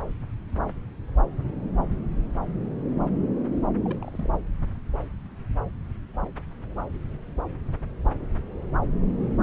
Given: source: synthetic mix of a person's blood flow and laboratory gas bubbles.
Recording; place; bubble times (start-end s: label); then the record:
Doppler ultrasound of blood flow; subclavian vein
3.84-4.10 s: bubbles
4.13-4.29 s: bubbles
4.31-4.39 s: bubbles
From the record:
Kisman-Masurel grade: 211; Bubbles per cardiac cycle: several, 3 to 8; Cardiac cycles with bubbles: 1 to 10%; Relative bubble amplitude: barely perceptible (0.100 to 0.250); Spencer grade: 1 (occasional bubble signal discernible with the cardiac motion signal, with majority of cardiac periods free of bubbles); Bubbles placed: anywhere in the cardiac cycle